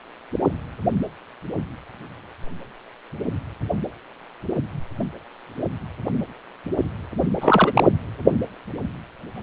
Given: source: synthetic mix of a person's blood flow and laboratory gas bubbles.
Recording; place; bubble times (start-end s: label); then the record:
Doppler ultrasound of blood flow; precordium
7.40-7.92 s: bubbles
From the record:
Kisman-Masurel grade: 212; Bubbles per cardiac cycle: several, 3 to 8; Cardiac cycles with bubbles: 1 to 10%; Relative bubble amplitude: moderate (0.250 to 0.450); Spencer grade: 1 (occasional bubble signal discernible with the cardiac motion signal, with majority of cardiac periods free of bubbles); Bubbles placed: anywhere in the cardiac cycle